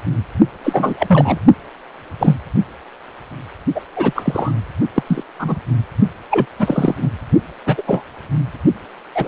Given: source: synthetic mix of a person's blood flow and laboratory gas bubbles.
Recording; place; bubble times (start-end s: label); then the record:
Doppler ultrasound of blood flow; precordium
0.64-0.94 s: bubbles
0.99-1.38 s: bubbles
2.19-2.37 s: bubbles
3.75-3.80 s: bubbles
3.96-4.53 s: bubbles
4.96-5.04 s: bubbles
5.07-5.24 s: bubbles
5.39-5.59 s: bubbles
6.30-6.46 s: bubbles
6.59-6.95 s: bubbles
7.02-7.09 s: bubbles
7.66-7.82 s: bubbles
7.87-8.03 s: bubbles
9.14-9.28 s: bubbles
From the record:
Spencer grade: 3 (all of the cardiac periods contain showers or single bubble signals, but not dominating or overriding the cardiac motion signals); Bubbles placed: only in the low amplitude regions of the cardiac cycle